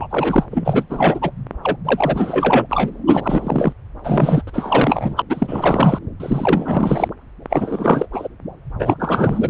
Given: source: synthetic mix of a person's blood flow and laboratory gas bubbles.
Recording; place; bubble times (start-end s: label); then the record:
Doppler ultrasound of blood flow; subclavian vein
0.00-0.07 s: bubbles
0.10-0.46 s: bubbles
0.51-0.86 s: bubbles
0.89-1.31 s: bubbles
1.64-1.77 s: bubbles
1.85-2.67 s: bubbles
2.69-2.91 s: bubbles
3.07-3.73 s: bubbles
4.03-4.42 s: bubbles
4.47-4.51 s: bubbles
4.53-5.22 s: bubbles
5.29-5.98 s: bubbles
6.19-7.08 s: bubbles
7.49-8.06 s: bubbles
8.12-8.28 s: bubbles
8.79-8.95 s: bubbles
8.99-9.50 s: bubbles
From the record:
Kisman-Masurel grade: 343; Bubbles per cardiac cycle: rolling drumbeat, 9 or more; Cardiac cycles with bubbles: 100%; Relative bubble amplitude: loud (0.450 to 0.775); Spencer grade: 3 (all of the cardiac periods contain showers or single bubble signals, but not dominating or overriding the cardiac motion signals); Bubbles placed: anywhere in the cardiac cycle